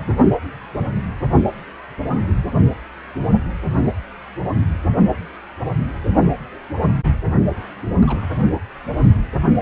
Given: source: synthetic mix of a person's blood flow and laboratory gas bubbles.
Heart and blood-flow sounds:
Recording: Doppler ultrasound of blood flow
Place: precordium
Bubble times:
8.02-8.50 s: bubbles
From the record:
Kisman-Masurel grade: 111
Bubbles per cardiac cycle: 1 to 2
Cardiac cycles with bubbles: 1 to 10%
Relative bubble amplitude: barely perceptible (0.100 to 0.250)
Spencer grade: 1 (occasional bubble signal discernible with the cardiac motion signal, with majority of cardiac periods free of bubbles)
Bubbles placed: only in the low amplitude regions of the cardiac cycle

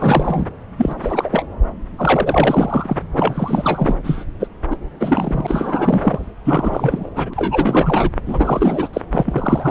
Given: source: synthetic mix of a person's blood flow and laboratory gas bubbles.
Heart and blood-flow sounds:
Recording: Doppler ultrasound of blood flow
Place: subclavian vein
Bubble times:
0.00-0.46 s: bubbles
0.77-0.94 s: bubbles
1.01-1.45 s: bubbles
1.98-2.96 s: bubbles
3.15-3.95 s: bubbles
4.04-4.25 s: bubbles
4.40-4.47 s: bubbles
4.70-4.77 s: bubbles
5.00-6.29 s: bubbles
6.45-7.10 s: bubbles
7.15-8.10 s: bubbles
8.25-8.88 s: bubbles
8.93-9.01 s: bubbles
9.12-9.70 s: bubbles
From the record:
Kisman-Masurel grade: 333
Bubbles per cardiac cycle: rolling drumbeat, 9 or more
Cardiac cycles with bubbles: 50 to 99%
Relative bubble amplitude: loud (0.450 to 0.775)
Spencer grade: 3 (all of the cardiac periods contain showers or single bubble signals, but not dominating or overriding the cardiac motion signals)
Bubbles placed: anywhere in the cardiac cycle

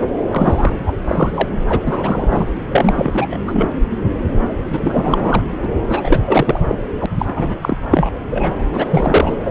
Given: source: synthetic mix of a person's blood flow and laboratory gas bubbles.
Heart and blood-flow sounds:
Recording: Doppler ultrasound of blood flow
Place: subclavian vein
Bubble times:
0.31-0.76 s: bubbles
0.86-0.93 s: bubbles
1.02-1.48 s: bubbles
1.69-1.80 s: bubbles
1.86-2.45 s: bubbles
2.72-3.38 s: bubbles
3.47-3.71 s: bubbles
4.67-5.42 s: bubbles
5.62-5.69 s: bubbles
5.88-6.20 s: bubbles
6.25-6.59 s: bubbles
6.67-6.75 s: bubbles
7.00-7.06 s: bubbles
7.19-7.55 s: bubbles
7.61-7.77 s: bubbles
7.91-8.10 s: bubbles
8.29-8.55 s: bubbles
8.73-8.86 s: bubbles
8.90-9.34 s: bubbles
9.44-9.51 s: bubbles
From the record:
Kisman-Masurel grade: 343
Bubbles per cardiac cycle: rolling drumbeat, 9 or more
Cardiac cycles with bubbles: 100%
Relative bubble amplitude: loud (0.450 to 0.775)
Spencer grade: 3 (all of the cardiac periods contain showers or single bubble signals, but not dominating or overriding the cardiac motion signals)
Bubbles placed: anywhere in the cardiac cycle

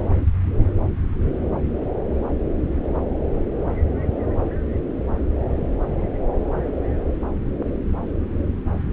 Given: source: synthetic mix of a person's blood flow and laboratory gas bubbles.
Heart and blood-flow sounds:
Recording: Doppler ultrasound of blood flow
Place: subclavian vein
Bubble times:
no bubbles
From the record:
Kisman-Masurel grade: 000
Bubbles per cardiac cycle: 0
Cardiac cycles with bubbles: 0%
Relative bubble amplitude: no bubbles discernible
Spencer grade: 0 (complete lack of bubble signals)

